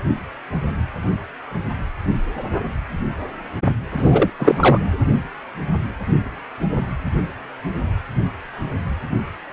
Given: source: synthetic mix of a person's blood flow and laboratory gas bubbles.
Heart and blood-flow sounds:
Doppler ultrasound of blood flow; precordium
3.96-4.30 s: bubbles
4.38-4.79 s: bubbles
From the record:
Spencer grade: 1 (occasional bubble signal discernible with the cardiac motion signal, with majority of cardiac periods free of bubbles); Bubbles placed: anywhere in the cardiac cycle

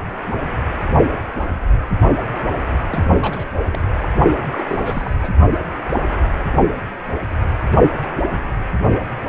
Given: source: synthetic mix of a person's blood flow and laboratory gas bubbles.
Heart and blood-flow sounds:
Doppler ultrasound of blood flow; precordium
2.90-3.48 s: bubbles
3.72-3.78 s: bubbles
3.98-4.13 s: bubbles
4.51-4.65 s: bubbles
4.68-5.15 s: bubbles
5.18-5.34 s: bubbles
From the record:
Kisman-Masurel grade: 221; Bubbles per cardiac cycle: several, 3 to 8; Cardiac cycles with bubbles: 10 to 50%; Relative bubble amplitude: barely perceptible (0.100 to 0.250); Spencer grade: 2 (many but less than half of the cardiac periods contain bubble signals, singularly or in groups); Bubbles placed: only in the low amplitude regions of the cardiac cycle

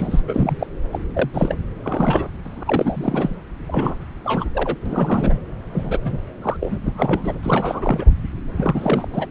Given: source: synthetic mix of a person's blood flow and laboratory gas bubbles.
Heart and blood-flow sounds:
Doppler ultrasound of blood flow; subclavian vein
0.00-0.20 s: bubbles
0.27-0.66 s: bubbles
0.92-0.99 s: bubbles
1.15-1.29 s: bubbles
1.33-1.55 s: bubbles
1.83-2.29 s: bubbles
2.45-3.35 s: bubbles
3.67-3.95 s: bubbles
4.24-4.44 s: bubbles
4.54-4.76 s: bubbles
4.85-5.38 s: bubbles
5.72-5.99 s: bubbles
6.04-6.18 s: bubbles
6.42-6.56 s: bubbles
6.61-6.77 s: bubbles
6.82-7.33 s: bubbles
7.42-8.05 s: bubbles
8.56-9.08 s: bubbles
9.13-9.26 s: bubbles
From the record:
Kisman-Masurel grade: 342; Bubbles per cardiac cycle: rolling drumbeat, 9 or more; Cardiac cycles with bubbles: 100%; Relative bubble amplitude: moderate (0.250 to 0.450); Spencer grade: 3 (all of the cardiac periods contain showers or single bubble signals, but not dominating or overriding the cardiac motion signals); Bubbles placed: anywhere in the cardiac cycle

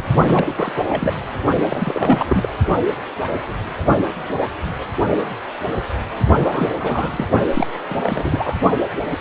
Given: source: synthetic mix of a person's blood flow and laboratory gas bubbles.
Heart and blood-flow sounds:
Doppler ultrasound of blood flow; precordium
0.00-0.04 s: bubbles
0.27-0.73 s: bubbles
0.76-0.85 s: bubbles
0.89-1.14 s: bubbles
1.70-2.48 s: bubbles
6.38-6.70 s: bubbles
6.80-7.27 s: bubbles
7.54-7.67 s: bubbles
7.87-8.58 s: bubbles
From the record:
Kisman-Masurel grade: 332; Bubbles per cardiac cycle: rolling drumbeat, 9 or more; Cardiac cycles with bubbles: 50 to 99%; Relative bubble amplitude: moderate (0.250 to 0.450); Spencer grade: 3 (all of the cardiac periods contain showers or single bubble signals, but not dominating or overriding the cardiac motion signals); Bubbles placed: only in the low amplitude regions of the cardiac cycle

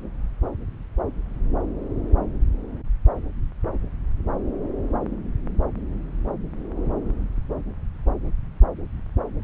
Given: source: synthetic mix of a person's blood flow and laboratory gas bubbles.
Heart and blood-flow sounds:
Doppler ultrasound of blood flow; subclavian vein
no bubbles
From the record:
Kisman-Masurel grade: 000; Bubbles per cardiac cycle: 0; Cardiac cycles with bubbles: 0%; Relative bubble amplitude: no bubbles discernible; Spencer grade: 0 (complete lack of bubble signals)

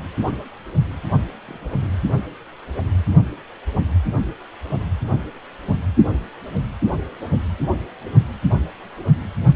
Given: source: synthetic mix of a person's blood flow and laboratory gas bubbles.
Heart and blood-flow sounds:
Doppler ultrasound of blood flow; precordium
1.48-1.90 s: bubbles
7.58-7.75 s: bubbles
From the record:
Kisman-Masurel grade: 121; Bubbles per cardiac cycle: 1 to 2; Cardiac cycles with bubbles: 10 to 50%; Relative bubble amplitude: barely perceptible (0.100 to 0.250); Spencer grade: 2 (many but less than half of the cardiac periods contain bubble signals, singularly or in groups); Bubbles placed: only in the low amplitude regions of the cardiac cycle

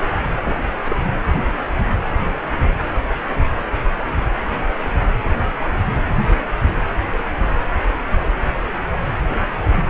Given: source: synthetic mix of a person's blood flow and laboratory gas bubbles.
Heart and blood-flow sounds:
Doppler ultrasound of blood flow; precordium
0.44-0.57 s: bubbles
0.84-0.96 s: bubbles
From the record:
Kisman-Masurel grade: 211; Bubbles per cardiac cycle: several, 3 to 8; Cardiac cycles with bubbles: 1 to 10%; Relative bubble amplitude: barely perceptible (0.100 to 0.250); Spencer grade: 1 (occasional bubble signal discernible with the cardiac motion signal, with majority of cardiac periods free of bubbles); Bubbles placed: anywhere in the cardiac cycle

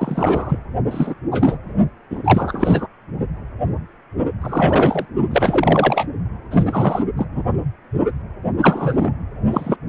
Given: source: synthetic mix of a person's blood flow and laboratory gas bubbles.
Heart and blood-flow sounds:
Doppler ultrasound of blood flow; precordium
0.00-0.58 s: bubbles
0.91-1.15 s: bubbles
1.31-1.58 s: bubbles
2.10-2.87 s: bubbles
4.42-5.05 s: bubbles
5.30-6.06 s: bubbles
6.50-7.02 s: bubbles
7.17-7.26 s: bubbles
7.31-7.43 s: bubbles
8.61-9.12 s: bubbles
9.51-9.77 s: bubbles
From the record:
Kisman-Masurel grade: 333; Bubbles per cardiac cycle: rolling drumbeat, 9 or more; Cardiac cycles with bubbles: 50 to 99%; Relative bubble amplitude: loud (0.450 to 0.775); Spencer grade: 3 (all of the cardiac periods contain showers or single bubble signals, but not dominating or overriding the cardiac motion signals); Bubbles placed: only in the low amplitude regions of the cardiac cycle

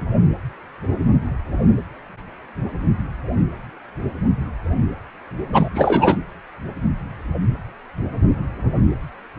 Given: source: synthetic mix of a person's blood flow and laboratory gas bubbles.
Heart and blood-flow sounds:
Doppler ultrasound of blood flow; precordium
5.53-5.69 s: bubbles
5.75-6.19 s: bubbles
From the record:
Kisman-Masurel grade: 213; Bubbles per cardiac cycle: several, 3 to 8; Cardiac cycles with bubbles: 1 to 10%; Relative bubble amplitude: loud (0.450 to 0.775); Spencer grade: 1 (occasional bubble signal discernible with the cardiac motion signal, with majority of cardiac periods free of bubbles); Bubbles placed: anywhere in the cardiac cycle

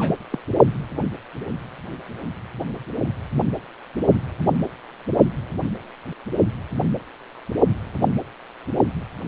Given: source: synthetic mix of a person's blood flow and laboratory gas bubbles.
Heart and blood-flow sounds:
Doppler ultrasound of blood flow; precordium
0.00-0.15 s: bubbles
0.32-0.38 s: bubbles
From the record:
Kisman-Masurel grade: 121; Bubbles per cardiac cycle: 1 to 2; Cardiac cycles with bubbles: 10 to 50%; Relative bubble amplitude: barely perceptible (0.100 to 0.250); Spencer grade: 2 (many but less than half of the cardiac periods contain bubble signals, singularly or in groups); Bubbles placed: only in the low amplitude regions of the cardiac cycle

